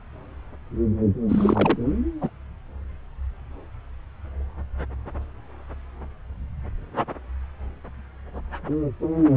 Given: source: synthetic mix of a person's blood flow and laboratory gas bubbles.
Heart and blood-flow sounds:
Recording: Doppler ultrasound of blood flow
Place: subclavian vein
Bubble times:
1.29-1.79 s: bubbles
2.21-2.29 s: bubbles
From the record:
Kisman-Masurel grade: 212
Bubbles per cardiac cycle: several, 3 to 8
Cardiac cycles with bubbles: 1 to 10%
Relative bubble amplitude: moderate (0.250 to 0.450)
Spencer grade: 1 (occasional bubble signal discernible with the cardiac motion signal, with majority of cardiac periods free of bubbles)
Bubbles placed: anywhere in the cardiac cycle

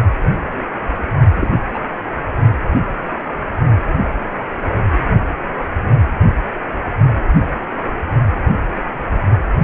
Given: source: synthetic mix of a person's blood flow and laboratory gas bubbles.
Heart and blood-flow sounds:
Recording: Doppler ultrasound of blood flow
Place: precordium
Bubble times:
1.34-1.51 s: bubbles
1.74-1.79 s: bubbles
From the record:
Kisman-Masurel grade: 112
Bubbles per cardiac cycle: 1 to 2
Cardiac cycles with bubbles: 1 to 10%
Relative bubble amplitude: moderate (0.250 to 0.450)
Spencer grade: 1 (occasional bubble signal discernible with the cardiac motion signal, with majority of cardiac periods free of bubbles)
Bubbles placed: only in the low amplitude regions of the cardiac cycle

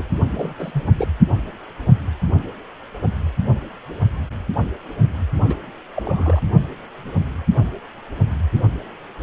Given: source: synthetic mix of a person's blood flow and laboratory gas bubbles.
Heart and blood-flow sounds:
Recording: Doppler ultrasound of blood flow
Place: precordium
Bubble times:
0.00-0.04 s: bubbles
0.36-0.53 s: bubbles
0.58-0.84 s: bubbles
0.97-1.08 s: bubbles
5.44-5.57 s: bubbles
5.96-6.42 s: bubbles
From the record:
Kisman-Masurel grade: 222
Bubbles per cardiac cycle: several, 3 to 8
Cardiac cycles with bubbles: 10 to 50%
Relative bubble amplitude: moderate (0.250 to 0.450)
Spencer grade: 2 (many but less than half of the cardiac periods contain bubble signals, singularly or in groups)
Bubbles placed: only in the low amplitude regions of the cardiac cycle

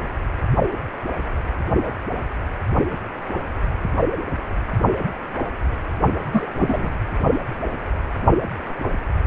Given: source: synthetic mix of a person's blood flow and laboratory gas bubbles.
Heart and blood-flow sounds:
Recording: Doppler ultrasound of blood flow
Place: precordium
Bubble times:
6.31-6.47 s: bubbles
6.55-6.92 s: bubbles
From the record:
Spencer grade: 1 (occasional bubble signal discernible with the cardiac motion signal, with majority of cardiac periods free of bubbles)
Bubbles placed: only in the low amplitude regions of the cardiac cycle

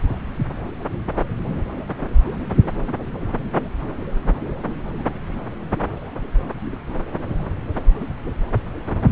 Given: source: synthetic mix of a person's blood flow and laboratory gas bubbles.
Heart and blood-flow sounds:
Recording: Doppler ultrasound of blood flow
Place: subclavian vein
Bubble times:
no bubbles
From the record:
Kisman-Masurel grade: 000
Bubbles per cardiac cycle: 0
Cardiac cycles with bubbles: 0%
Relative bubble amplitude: no bubbles discernible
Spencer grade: 0 (complete lack of bubble signals)

